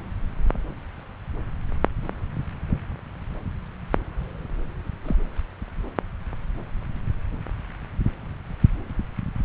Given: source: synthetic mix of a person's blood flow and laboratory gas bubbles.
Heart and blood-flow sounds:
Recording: Doppler ultrasound of blood flow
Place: subclavian vein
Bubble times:
5.05-5.16 s: bubbles
From the record:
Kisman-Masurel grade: 111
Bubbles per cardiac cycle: 1 to 2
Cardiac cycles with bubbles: 1 to 10%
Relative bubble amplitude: barely perceptible (0.100 to 0.250)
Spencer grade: 1 (occasional bubble signal discernible with the cardiac motion signal, with majority of cardiac periods free of bubbles)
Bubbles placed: anywhere in the cardiac cycle

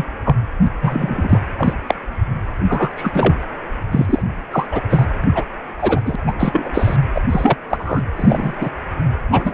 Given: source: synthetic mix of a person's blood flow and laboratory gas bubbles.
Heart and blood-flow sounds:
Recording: Doppler ultrasound of blood flow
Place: precordium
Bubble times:
0.00-0.06 s: bubbles
0.25-0.36 s: bubbles
0.81-1.39 s: bubbles
1.58-1.73 s: bubbles
1.87-1.95 s: bubbles
2.68-2.90 s: bubbles
2.97-3.36 s: bubbles
3.92-4.23 s: bubbles
4.51-4.67 s: bubbles
4.71-4.80 s: bubbles
4.90-5.06 s: bubbles
5.24-5.26 s: bubbles
5.29-5.46 s: bubbles
5.79-6.00 s: bubbles
6.05-6.16 s: bubbles
6.26-6.33 s: bubbles
6.39-6.96 s: bubbles
7.14-7.21 s: bubbles
7.29-7.57 s: bubbles
7.69-8.03 s: bubbles
8.16-8.53 s: bubbles
8.60-8.70 s: bubbles
9.31-9.54 s: bubbles
From the record:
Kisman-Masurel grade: 243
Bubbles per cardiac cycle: several, 3 to 8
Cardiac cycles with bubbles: 100%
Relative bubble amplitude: loud (0.450 to 0.775)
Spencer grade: 3 (all of the cardiac periods contain showers or single bubble signals, but not dominating or overriding the cardiac motion signals)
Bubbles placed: anywhere in the cardiac cycle

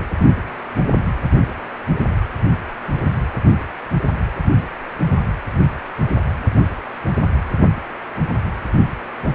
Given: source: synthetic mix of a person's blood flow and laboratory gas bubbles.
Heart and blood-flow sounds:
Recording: Doppler ultrasound of blood flow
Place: precordium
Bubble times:
no bubbles
From the record:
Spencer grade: 0 (complete lack of bubble signals)

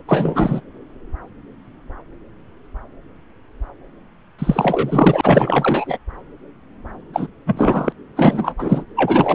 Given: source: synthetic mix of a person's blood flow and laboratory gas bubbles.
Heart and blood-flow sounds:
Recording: Doppler ultrasound of blood flow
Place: subclavian vein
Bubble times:
0.08-0.60 s: bubbles
4.39-5.98 s: bubbles
7.13-7.27 s: bubbles
7.46-7.93 s: bubbles
8.16-8.54 s: bubbles
8.59-8.84 s: bubbles
8.96-9.35 s: bubbles
From the record:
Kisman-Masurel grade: 333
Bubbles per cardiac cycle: rolling drumbeat, 9 or more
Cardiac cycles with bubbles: 50 to 99%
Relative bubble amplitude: loud (0.450 to 0.775)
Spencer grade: 3 (all of the cardiac periods contain showers or single bubble signals, but not dominating or overriding the cardiac motion signals)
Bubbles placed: anywhere in the cardiac cycle

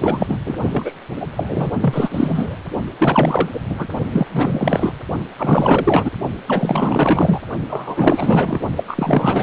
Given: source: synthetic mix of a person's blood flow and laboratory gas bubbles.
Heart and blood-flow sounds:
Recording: Doppler ultrasound of blood flow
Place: precordium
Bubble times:
0.00-0.38 s: bubbles
0.45-0.55 s: bubbles
0.69-0.92 s: bubbles
1.20-1.26 s: bubbles
1.36-1.76 s: bubbles
1.80-2.58 s: bubbles
2.99-3.49 s: bubbles
3.54-3.60 s: bubbles
3.70-3.88 s: bubbles
4.12-4.92 s: bubbles
5.38-6.11 s: bubbles
6.47-7.40 s: bubbles
7.69-8.61 s: bubbles
8.77-8.84 s: bubbles
8.88-9.43 s: bubbles
From the record:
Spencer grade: 4 (maximum detectable bubble signal sounding continuously throughout systole and diastole of every cardiac period, and overriding the amplitude of the normal cardiac signals)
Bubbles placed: only in the low amplitude regions of the cardiac cycle

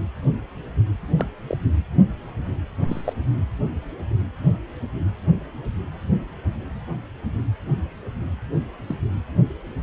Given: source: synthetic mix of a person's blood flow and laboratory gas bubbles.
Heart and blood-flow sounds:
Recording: Doppler ultrasound of blood flow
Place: precordium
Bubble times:
1.16-1.26 s: bubbles
1.48-1.57 s: bubbles
2.88-3.02 s: bubbles
3.04-3.13 s: bubbles
8.87-8.96 s: bubbles
From the record:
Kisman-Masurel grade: 122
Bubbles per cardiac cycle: 1 to 2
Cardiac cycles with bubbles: 10 to 50%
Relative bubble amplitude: moderate (0.250 to 0.450)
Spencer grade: 2 (many but less than half of the cardiac periods contain bubble signals, singularly or in groups)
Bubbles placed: anywhere in the cardiac cycle

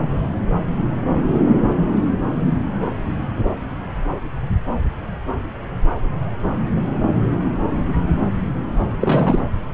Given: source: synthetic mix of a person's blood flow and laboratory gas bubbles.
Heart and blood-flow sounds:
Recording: Doppler ultrasound of blood flow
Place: subclavian vein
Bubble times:
9.01-9.39 s: bubbles
From the record:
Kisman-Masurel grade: 212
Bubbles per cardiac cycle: several, 3 to 8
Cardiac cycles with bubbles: 1 to 10%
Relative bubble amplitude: moderate (0.250 to 0.450)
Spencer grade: 1 (occasional bubble signal discernible with the cardiac motion signal, with majority of cardiac periods free of bubbles)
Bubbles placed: anywhere in the cardiac cycle

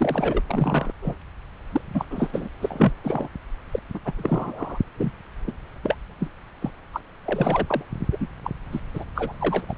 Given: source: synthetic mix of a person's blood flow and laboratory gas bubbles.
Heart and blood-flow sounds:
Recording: Doppler ultrasound of blood flow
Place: subclavian vein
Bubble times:
0.00-0.42 s: bubbles
0.46-0.92 s: bubbles
1.01-1.16 s: bubbles
1.72-1.81 s: bubbles
1.94-2.05 s: bubbles
2.10-2.48 s: bubbles
2.60-2.93 s: bubbles
3.04-3.29 s: bubbles
3.72-3.80 s: bubbles
3.94-3.99 s: bubbles
4.04-4.12 s: bubbles
4.18-4.79 s: bubbles
4.97-5.12 s: bubbles
5.47-5.52 s: bubbles
5.83-5.95 s: bubbles
6.20-6.29 s: bubbles
6.61-6.71 s: bubbles
6.93-7.01 s: bubbles
7.25-7.83 s: bubbles
8.12-8.18 s: bubbles
8.20-8.27 s: bubbles
8.44-8.51 s: bubbles
8.72-8.80 s: bubbles
8.94-9.04 s: bubbles
9.15-9.33 s: bubbles
9.41-9.66 s: bubbles
9.69-9.74 s: bubbles
From the record:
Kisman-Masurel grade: 242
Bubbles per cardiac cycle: several, 3 to 8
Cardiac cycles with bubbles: 100%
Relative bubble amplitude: moderate (0.250 to 0.450)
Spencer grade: 3 (all of the cardiac periods contain showers or single bubble signals, but not dominating or overriding the cardiac motion signals)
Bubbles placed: anywhere in the cardiac cycle

